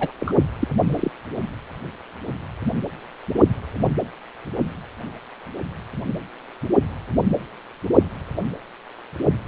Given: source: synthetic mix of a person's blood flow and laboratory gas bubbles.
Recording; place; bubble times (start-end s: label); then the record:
Doppler ultrasound of blood flow; precordium
0.00-0.12 s: bubbles
0.19-0.34 s: bubbles
0.59-0.68 s: bubbles
0.86-1.10 s: bubbles
From the record:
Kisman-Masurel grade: 222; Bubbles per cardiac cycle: several, 3 to 8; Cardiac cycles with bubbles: 10 to 50%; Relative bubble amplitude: moderate (0.250 to 0.450); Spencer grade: 2 (many but less than half of the cardiac periods contain bubble signals, singularly or in groups); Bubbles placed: anywhere in the cardiac cycle